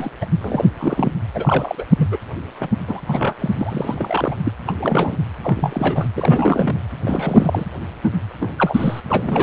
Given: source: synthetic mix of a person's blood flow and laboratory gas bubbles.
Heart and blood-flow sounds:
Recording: Doppler ultrasound of blood flow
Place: precordium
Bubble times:
0.00-0.11 s: bubbles
0.21-0.26 s: bubbles
0.41-0.65 s: bubbles
0.76-1.11 s: bubbles
1.34-1.84 s: bubbles
1.98-2.08 s: bubbles
2.11-2.18 s: bubbles
2.58-2.68 s: bubbles
2.87-3.01 s: bubbles
3.06-3.34 s: bubbles
3.39-3.51 s: bubbles
3.60-4.35 s: bubbles
4.44-4.50 s: bubbles
4.67-5.17 s: bubbles
5.43-6.08 s: bubbles
6.15-6.80 s: bubbles
7.05-7.65 s: bubbles
8.03-8.12 s: bubbles
8.40-8.52 s: bubbles
8.56-9.00 s: bubbles
9.09-9.43 s: bubbles
From the record:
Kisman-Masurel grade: 342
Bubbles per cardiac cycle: rolling drumbeat, 9 or more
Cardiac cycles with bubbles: 100%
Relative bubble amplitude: moderate (0.250 to 0.450)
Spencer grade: 3 (all of the cardiac periods contain showers or single bubble signals, but not dominating or overriding the cardiac motion signals)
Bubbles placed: anywhere in the cardiac cycle

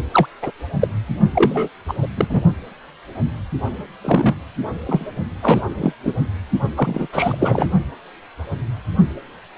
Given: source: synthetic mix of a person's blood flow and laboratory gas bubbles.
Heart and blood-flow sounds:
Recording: Doppler ultrasound of blood flow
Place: precordium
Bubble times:
0.13-0.26 s: bubbles
0.42-0.51 s: bubbles
0.80-0.88 s: bubbles
1.34-1.68 s: bubbles
1.88-1.94 s: bubbles
2.02-2.07 s: bubbles
2.17-2.26 s: bubbles
2.29-2.42 s: bubbles
4.01-4.35 s: bubbles
4.87-5.05 s: bubbles
5.42-5.62 s: bubbles
5.79-5.93 s: bubbles
6.04-6.13 s: bubbles
6.75-7.07 s: bubbles
7.12-7.69 s: bubbles
From the record:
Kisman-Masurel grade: 223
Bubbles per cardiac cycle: several, 3 to 8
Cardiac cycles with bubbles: 10 to 50%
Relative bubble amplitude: loud (0.450 to 0.775)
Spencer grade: 2 (many but less than half of the cardiac periods contain bubble signals, singularly or in groups)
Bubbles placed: only in the low amplitude regions of the cardiac cycle

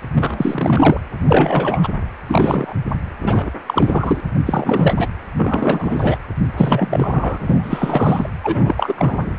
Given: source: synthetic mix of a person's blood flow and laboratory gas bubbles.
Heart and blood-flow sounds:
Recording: Doppler ultrasound of blood flow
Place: precordium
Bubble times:
0.14-1.00 s: bubbles
1.27-1.88 s: bubbles
2.28-2.73 s: bubbles
3.21-3.51 s: bubbles
3.67-4.21 s: bubbles
4.46-5.07 s: bubbles
5.37-6.19 s: bubbles
6.57-8.29 s: bubbles
8.43-8.74 s: bubbles
8.77-8.94 s: bubbles
8.96-9.37 s: bubbles
From the record:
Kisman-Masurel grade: 343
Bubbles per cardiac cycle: rolling drumbeat, 9 or more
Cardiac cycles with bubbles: 100%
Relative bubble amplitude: loud (0.450 to 0.775)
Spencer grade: 3 (all of the cardiac periods contain showers or single bubble signals, but not dominating or overriding the cardiac motion signals)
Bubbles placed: anywhere in the cardiac cycle

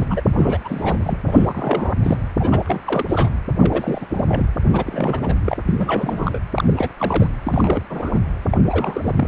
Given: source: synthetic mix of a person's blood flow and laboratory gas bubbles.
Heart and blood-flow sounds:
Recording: Doppler ultrasound of blood flow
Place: precordium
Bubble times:
0.00-0.05 s: bubbles
0.09-0.22 s: bubbles
0.36-0.58 s: bubbles
0.65-0.98 s: bubbles
1.04-1.18 s: bubbles
1.27-1.94 s: bubbles
2.02-2.17 s: bubbles
2.39-2.61 s: bubbles
2.66-2.81 s: bubbles
2.85-3.06 s: bubbles
3.08-3.31 s: bubbles
3.61-4.05 s: bubbles
4.09-4.46 s: bubbles
4.73-5.34 s: bubbles
5.45-5.57 s: bubbles
5.66-6.43 s: bubbles
6.52-6.74 s: bubbles
6.76-6.89 s: bubbles
7.00-7.28 s: bubbles
7.45-7.82 s: bubbles
7.90-8.20 s: bubbles
8.50-8.57 s: bubbles
8.68-9.28 s: bubbles
From the record:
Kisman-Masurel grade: 342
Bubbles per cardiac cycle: rolling drumbeat, 9 or more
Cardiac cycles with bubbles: 100%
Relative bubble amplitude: moderate (0.250 to 0.450)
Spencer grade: 3 (all of the cardiac periods contain showers or single bubble signals, but not dominating or overriding the cardiac motion signals)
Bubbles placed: anywhere in the cardiac cycle

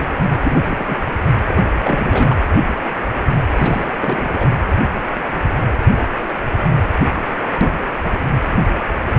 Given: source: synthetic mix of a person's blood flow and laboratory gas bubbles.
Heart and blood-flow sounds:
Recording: Doppler ultrasound of blood flow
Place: precordium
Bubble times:
0.43-0.96 s: bubbles
1.47-1.60 s: bubbles
1.80-2.36 s: bubbles
3.55-4.48 s: bubbles
From the record:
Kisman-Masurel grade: 222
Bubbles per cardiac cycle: several, 3 to 8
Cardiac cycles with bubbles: 10 to 50%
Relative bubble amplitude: moderate (0.250 to 0.450)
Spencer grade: 2 (many but less than half of the cardiac periods contain bubble signals, singularly or in groups)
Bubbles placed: anywhere in the cardiac cycle

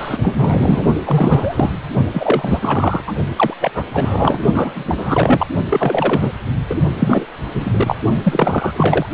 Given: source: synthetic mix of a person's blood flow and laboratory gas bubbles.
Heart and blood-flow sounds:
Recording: Doppler ultrasound of blood flow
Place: precordium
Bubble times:
0.00-0.83 s: bubbles
1.04-1.71 s: bubbles
2.13-3.03 s: bubbles
3.06-3.12 s: bubbles
3.36-3.54 s: bubbles
3.60-3.71 s: bubbles
3.74-3.85 s: bubbles
3.93-4.38 s: bubbles
4.52-5.47 s: bubbles
5.69-6.32 s: bubbles
6.70-6.75 s: bubbles
6.99-7.25 s: bubbles
7.54-7.98 s: bubbles
8.24-9.06 s: bubbles
From the record:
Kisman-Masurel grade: 343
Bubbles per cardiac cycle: rolling drumbeat, 9 or more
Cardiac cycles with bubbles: 100%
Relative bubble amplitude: loud (0.450 to 0.775)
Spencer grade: 3 (all of the cardiac periods contain showers or single bubble signals, but not dominating or overriding the cardiac motion signals)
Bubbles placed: only in the low amplitude regions of the cardiac cycle

